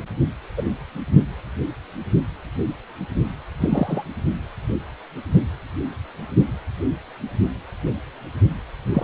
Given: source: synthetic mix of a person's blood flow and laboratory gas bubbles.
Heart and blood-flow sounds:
Doppler ultrasound of blood flow; precordium
0.57-0.62 s: bubbles
3.60-4.04 s: bubbles
8.93-9.04 s: bubbles
From the record:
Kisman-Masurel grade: 122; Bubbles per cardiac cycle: 1 to 2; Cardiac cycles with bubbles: 10 to 50%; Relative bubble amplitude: moderate (0.250 to 0.450); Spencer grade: 2 (many but less than half of the cardiac periods contain bubble signals, singularly or in groups); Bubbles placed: only in the low amplitude regions of the cardiac cycle

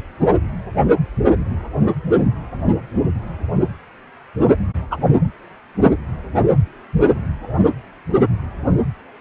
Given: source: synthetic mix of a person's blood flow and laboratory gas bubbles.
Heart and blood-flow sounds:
Doppler ultrasound of blood flow; precordium
4.90-4.97 s: bubbles
From the record:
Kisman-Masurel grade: 113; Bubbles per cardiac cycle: 1 to 2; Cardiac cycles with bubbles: 1 to 10%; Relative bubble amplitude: loud (0.450 to 0.775); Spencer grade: 1 (occasional bubble signal discernible with the cardiac motion signal, with majority of cardiac periods free of bubbles); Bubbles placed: anywhere in the cardiac cycle

